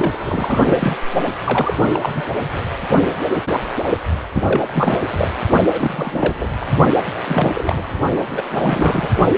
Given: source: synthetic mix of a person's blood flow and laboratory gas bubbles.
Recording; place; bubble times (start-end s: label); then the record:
Doppler ultrasound of blood flow; precordium
0.00-0.97 s: bubbles
1.45-1.74 s: bubbles
1.78-1.87 s: bubbles
1.93-2.22 s: bubbles
2.52-2.64 s: bubbles
4.33-4.61 s: bubbles
4.67-5.32 s: bubbles
5.71-6.33 s: bubbles
6.39-6.51 s: bubbles
6.61-6.68 s: bubbles
7.14-7.19 s: bubbles
7.27-7.83 s: bubbles
8.31-8.43 s: bubbles
8.51-9.10 s: bubbles
From the record:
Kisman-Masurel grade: 332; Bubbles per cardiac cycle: rolling drumbeat, 9 or more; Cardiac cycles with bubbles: 50 to 99%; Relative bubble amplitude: moderate (0.250 to 0.450); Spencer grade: 3 (all of the cardiac periods contain showers or single bubble signals, but not dominating or overriding the cardiac motion signals); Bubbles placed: only in the low amplitude regions of the cardiac cycle